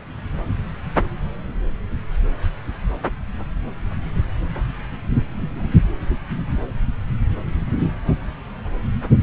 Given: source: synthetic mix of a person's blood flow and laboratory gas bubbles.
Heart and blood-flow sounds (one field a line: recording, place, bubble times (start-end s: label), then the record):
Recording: Doppler ultrasound of blood flow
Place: subclavian vein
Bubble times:
5.29-5.75 s: bubbles
From the record:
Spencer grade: 1 (occasional bubble signal discernible with the cardiac motion signal, with majority of cardiac periods free of bubbles)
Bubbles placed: anywhere in the cardiac cycle